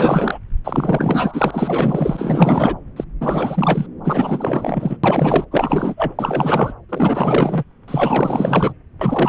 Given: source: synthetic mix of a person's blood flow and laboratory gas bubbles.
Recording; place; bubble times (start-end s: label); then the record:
Doppler ultrasound of blood flow; subclavian vein
0.00-0.38 s: bubbles
0.64-2.75 s: bubbles
2.96-3.04 s: bubbles
3.20-3.86 s: bubbles
4.04-4.97 s: bubbles
5.04-5.45 s: bubbles
5.51-6.12 s: bubbles
6.19-6.74 s: bubbles
6.89-7.64 s: bubbles
7.88-8.73 s: bubbles
9.01-9.28 s: bubbles
From the record:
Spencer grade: 4 (maximum detectable bubble signal sounding continuously throughout systole and diastole of every cardiac period, and overriding the amplitude of the normal cardiac signals); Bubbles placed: anywhere in the cardiac cycle